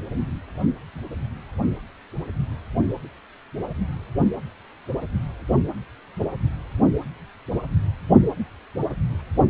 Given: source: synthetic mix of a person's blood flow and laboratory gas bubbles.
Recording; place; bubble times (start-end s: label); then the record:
Doppler ultrasound of blood flow; precordium
no bubbles
From the record:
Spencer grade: 0 (complete lack of bubble signals)